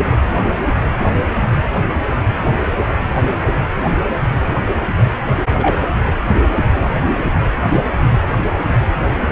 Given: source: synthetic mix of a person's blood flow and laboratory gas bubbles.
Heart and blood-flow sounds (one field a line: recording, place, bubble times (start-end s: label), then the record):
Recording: Doppler ultrasound of blood flow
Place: precordium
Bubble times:
5.58-5.82 s: bubbles
From the record:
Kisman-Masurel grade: 112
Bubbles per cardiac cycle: 1 to 2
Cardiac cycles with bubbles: 1 to 10%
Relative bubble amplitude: moderate (0.250 to 0.450)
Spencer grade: 1 (occasional bubble signal discernible with the cardiac motion signal, with majority of cardiac periods free of bubbles)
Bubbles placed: anywhere in the cardiac cycle